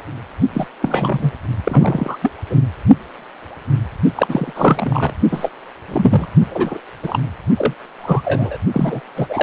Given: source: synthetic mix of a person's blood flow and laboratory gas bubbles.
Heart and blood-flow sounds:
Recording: Doppler ultrasound of blood flow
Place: precordium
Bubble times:
0.53-0.67 s: bubbles
0.81-1.31 s: bubbles
1.64-2.17 s: bubbles
2.22-2.32 s: bubbles
2.50-2.56 s: bubbles
4.15-4.53 s: bubbles
4.56-5.12 s: bubbles
5.31-5.49 s: bubbles
5.88-6.28 s: bubbles
6.50-6.80 s: bubbles
7.03-7.19 s: bubbles
7.57-7.74 s: bubbles
7.99-8.57 s: bubbles
8.72-9.01 s: bubbles
9.16-9.43 s: bubbles
From the record:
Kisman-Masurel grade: 233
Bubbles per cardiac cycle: several, 3 to 8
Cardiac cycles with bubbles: 50 to 99%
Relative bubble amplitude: loud (0.450 to 0.775)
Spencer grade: 3 (all of the cardiac periods contain showers or single bubble signals, but not dominating or overriding the cardiac motion signals)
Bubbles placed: only in the low amplitude regions of the cardiac cycle

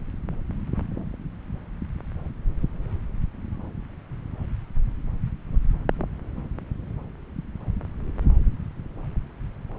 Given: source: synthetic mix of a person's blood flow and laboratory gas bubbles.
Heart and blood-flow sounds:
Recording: Doppler ultrasound of blood flow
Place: subclavian vein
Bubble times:
no bubbles
From the record:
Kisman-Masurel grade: 000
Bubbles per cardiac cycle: 0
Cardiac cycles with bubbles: 0%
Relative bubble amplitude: no bubbles discernible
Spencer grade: 0 (complete lack of bubble signals)

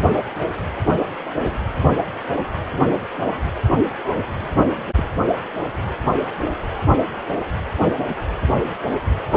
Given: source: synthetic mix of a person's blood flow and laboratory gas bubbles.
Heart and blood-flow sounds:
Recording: Doppler ultrasound of blood flow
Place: precordium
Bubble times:
4.96-5.10 s: bubbles
From the record:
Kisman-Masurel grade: 111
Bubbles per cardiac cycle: 1 to 2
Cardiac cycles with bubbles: 1 to 10%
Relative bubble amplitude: barely perceptible (0.100 to 0.250)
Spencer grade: 1 (occasional bubble signal discernible with the cardiac motion signal, with majority of cardiac periods free of bubbles)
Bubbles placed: anywhere in the cardiac cycle

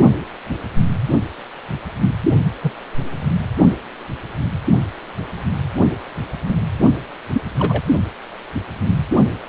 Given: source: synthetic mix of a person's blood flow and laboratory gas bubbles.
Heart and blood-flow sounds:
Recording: Doppler ultrasound of blood flow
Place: precordium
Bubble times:
2.62-2.73 s: bubbles
7.33-7.42 s: bubbles
7.58-7.82 s: bubbles
From the record:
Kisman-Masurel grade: 122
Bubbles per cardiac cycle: 1 to 2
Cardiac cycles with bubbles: 10 to 50%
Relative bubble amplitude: moderate (0.250 to 0.450)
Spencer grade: 2 (many but less than half of the cardiac periods contain bubble signals, singularly or in groups)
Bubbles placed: only in the low amplitude regions of the cardiac cycle

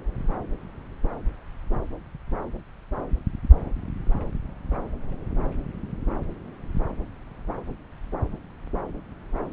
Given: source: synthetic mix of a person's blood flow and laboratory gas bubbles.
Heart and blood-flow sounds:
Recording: Doppler ultrasound of blood flow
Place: subclavian vein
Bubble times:
no bubbles
From the record:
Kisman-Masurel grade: 000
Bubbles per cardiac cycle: 0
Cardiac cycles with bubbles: 0%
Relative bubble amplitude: no bubbles discernible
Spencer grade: 0 (complete lack of bubble signals)

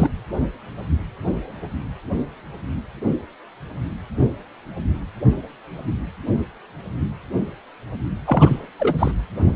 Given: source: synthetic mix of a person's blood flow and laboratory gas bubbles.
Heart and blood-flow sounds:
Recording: Doppler ultrasound of blood flow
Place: precordium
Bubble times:
0.00-0.09 s: bubbles
8.25-8.65 s: bubbles
8.79-9.12 s: bubbles
From the record:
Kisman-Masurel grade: 222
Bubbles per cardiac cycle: several, 3 to 8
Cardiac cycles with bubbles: 10 to 50%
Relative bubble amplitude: moderate (0.250 to 0.450)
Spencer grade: 2 (many but less than half of the cardiac periods contain bubble signals, singularly or in groups)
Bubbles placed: anywhere in the cardiac cycle

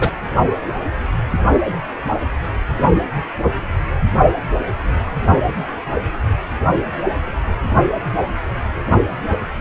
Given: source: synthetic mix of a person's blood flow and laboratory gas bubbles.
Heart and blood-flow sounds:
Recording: Doppler ultrasound of blood flow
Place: precordium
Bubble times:
0.00-0.11 s: bubbles
From the record:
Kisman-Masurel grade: 113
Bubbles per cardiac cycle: 1 to 2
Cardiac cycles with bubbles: 1 to 10%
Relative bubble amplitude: loud (0.450 to 0.775)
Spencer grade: 1 (occasional bubble signal discernible with the cardiac motion signal, with majority of cardiac periods free of bubbles)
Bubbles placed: only in the low amplitude regions of the cardiac cycle

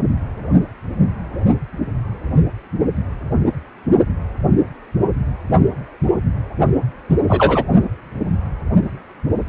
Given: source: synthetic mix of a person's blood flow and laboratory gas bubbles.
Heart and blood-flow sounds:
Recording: Doppler ultrasound of blood flow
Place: precordium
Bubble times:
7.09-7.16 s: bubbles
7.27-7.65 s: bubbles
From the record:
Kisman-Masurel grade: 113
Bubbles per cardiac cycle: 1 to 2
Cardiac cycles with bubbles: 1 to 10%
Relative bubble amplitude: loud (0.450 to 0.775)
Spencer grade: 1 (occasional bubble signal discernible with the cardiac motion signal, with majority of cardiac periods free of bubbles)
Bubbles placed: only in the low amplitude regions of the cardiac cycle

